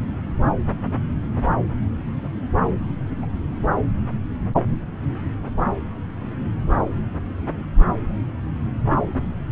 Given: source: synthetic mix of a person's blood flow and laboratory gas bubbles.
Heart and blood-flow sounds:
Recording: Doppler ultrasound of blood flow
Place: subclavian vein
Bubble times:
3.22-3.26 s: bubbles
From the record:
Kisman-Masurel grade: 111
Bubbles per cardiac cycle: 1 to 2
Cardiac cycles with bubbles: 1 to 10%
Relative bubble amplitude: barely perceptible (0.100 to 0.250)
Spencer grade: 1 (occasional bubble signal discernible with the cardiac motion signal, with majority of cardiac periods free of bubbles)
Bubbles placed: anywhere in the cardiac cycle

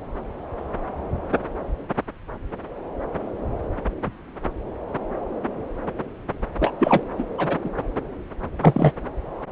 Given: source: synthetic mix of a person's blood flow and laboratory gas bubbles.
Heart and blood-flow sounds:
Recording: Doppler ultrasound of blood flow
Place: subclavian vein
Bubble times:
6.59-6.74 s: bubbles
6.79-7.04 s: bubbles
7.18-7.24 s: bubbles
7.38-7.58 s: bubbles
7.64-7.70 s: bubbles
8.62-8.93 s: bubbles
From the record:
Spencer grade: 2 (many but less than half of the cardiac periods contain bubble signals, singularly or in groups)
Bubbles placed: anywhere in the cardiac cycle

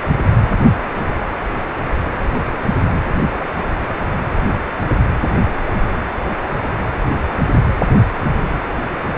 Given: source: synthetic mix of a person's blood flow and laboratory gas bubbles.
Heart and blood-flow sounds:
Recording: Doppler ultrasound of blood flow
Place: precordium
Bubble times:
no bubbles
From the record:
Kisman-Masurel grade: 000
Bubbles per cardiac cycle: 0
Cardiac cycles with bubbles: 0%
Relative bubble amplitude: no bubbles discernible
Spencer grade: 0 (complete lack of bubble signals)

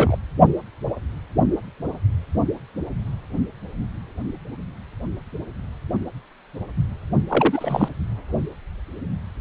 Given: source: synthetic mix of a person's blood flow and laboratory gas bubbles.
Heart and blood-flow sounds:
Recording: Doppler ultrasound of blood flow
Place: precordium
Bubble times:
0.00-0.16 s: bubbles
7.28-7.88 s: bubbles
From the record:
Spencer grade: 2 (many but less than half of the cardiac periods contain bubble signals, singularly or in groups)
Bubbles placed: only in the low amplitude regions of the cardiac cycle

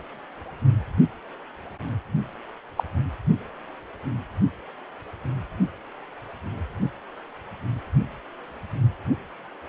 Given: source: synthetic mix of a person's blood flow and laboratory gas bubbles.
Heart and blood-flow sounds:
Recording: Doppler ultrasound of blood flow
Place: precordium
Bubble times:
2.76-2.83 s: bubbles
From the record:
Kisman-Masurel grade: 122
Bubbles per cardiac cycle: 1 to 2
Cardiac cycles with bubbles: 10 to 50%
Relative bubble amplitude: moderate (0.250 to 0.450)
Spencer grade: 2 (many but less than half of the cardiac periods contain bubble signals, singularly or in groups)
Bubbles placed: only in the low amplitude regions of the cardiac cycle

